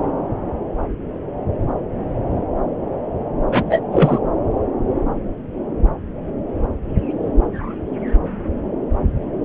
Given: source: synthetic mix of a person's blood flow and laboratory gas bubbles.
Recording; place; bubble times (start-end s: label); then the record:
Doppler ultrasound of blood flow; subclavian vein
3.51-3.80 s: bubbles
3.91-4.19 s: bubbles
From the record:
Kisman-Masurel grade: 213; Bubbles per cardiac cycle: several, 3 to 8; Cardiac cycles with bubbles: 1 to 10%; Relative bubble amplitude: loud (0.450 to 0.775); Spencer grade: 1 (occasional bubble signal discernible with the cardiac motion signal, with majority of cardiac periods free of bubbles); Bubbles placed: anywhere in the cardiac cycle